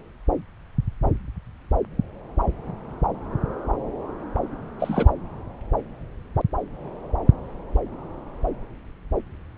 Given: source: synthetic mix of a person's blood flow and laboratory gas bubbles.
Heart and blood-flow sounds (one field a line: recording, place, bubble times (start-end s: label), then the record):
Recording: Doppler ultrasound of blood flow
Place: subclavian vein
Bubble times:
4.79-5.09 s: bubbles
From the record:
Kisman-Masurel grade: 212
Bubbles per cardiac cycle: several, 3 to 8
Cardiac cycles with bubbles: 1 to 10%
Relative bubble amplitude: moderate (0.250 to 0.450)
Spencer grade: 1 (occasional bubble signal discernible with the cardiac motion signal, with majority of cardiac periods free of bubbles)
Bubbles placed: anywhere in the cardiac cycle